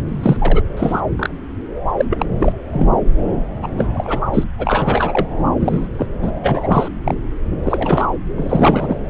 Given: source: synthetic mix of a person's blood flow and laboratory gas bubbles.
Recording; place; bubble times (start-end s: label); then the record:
Doppler ultrasound of blood flow; subclavian vein
0.08-0.62 s: bubbles
0.77-1.00 s: bubbles
1.17-1.29 s: bubbles
1.98-2.05 s: bubbles
2.10-2.25 s: bubbles
2.39-2.52 s: bubbles
2.73-2.88 s: bubbles
3.62-3.68 s: bubbles
3.77-3.88 s: bubbles
3.94-4.20 s: bubbles
4.34-4.44 s: bubbles
4.58-5.26 s: bubbles
5.60-5.87 s: bubbles
5.97-6.06 s: bubbles
6.22-6.31 s: bubbles
6.43-6.88 s: bubbles
7.04-7.14 s: bubbles
7.63-8.07 s: bubbles
8.37-8.99 s: bubbles
From the record:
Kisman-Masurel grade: 243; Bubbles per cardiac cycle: several, 3 to 8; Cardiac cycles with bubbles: 100%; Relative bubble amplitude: loud (0.450 to 0.775); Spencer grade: 3 (all of the cardiac periods contain showers or single bubble signals, but not dominating or overriding the cardiac motion signals); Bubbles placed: anywhere in the cardiac cycle